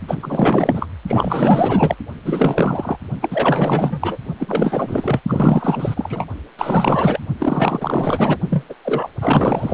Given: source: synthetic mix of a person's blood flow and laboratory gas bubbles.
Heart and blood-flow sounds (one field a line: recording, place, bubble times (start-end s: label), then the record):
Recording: Doppler ultrasound of blood flow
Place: precordium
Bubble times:
0.08-0.87 s: bubbles
1.07-1.95 s: bubbles
2.24-2.98 s: bubbles
3.22-4.17 s: bubbles
4.40-5.21 s: bubbles
5.28-5.94 s: bubbles
5.96-6.25 s: bubbles
6.58-7.20 s: bubbles
7.39-8.37 s: bubbles
8.50-8.65 s: bubbles
8.69-8.74 s: bubbles
8.84-9.08 s: bubbles
9.21-9.74 s: bubbles
From the record:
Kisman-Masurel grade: 444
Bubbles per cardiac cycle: continuous sound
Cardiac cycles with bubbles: 100%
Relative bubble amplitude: maximal (0.775 to 0.999)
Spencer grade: 4 (maximum detectable bubble signal sounding continuously throughout systole and diastole of every cardiac period, and overriding the amplitude of the normal cardiac signals)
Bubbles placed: only in the low amplitude regions of the cardiac cycle